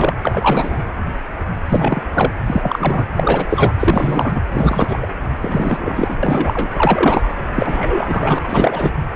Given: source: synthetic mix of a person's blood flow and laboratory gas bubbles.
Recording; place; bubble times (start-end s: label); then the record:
Doppler ultrasound of blood flow; precordium
0.00-0.14 s: bubbles
0.22-0.82 s: bubbles
1.69-2.03 s: bubbles
2.11-2.31 s: bubbles
2.46-3.06 s: bubbles
3.15-3.46 s: bubbles
3.49-3.74 s: bubbles
3.79-4.41 s: bubbles
4.52-5.07 s: bubbles
5.42-6.17 s: bubbles
6.23-6.70 s: bubbles
6.77-7.29 s: bubbles
7.54-8.38 s: bubbles
8.43-8.92 s: bubbles
From the record:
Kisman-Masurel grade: 333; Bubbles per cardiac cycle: rolling drumbeat, 9 or more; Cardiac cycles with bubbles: 50 to 99%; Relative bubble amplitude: loud (0.450 to 0.775); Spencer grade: 3 (all of the cardiac periods contain showers or single bubble signals, but not dominating or overriding the cardiac motion signals); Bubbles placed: anywhere in the cardiac cycle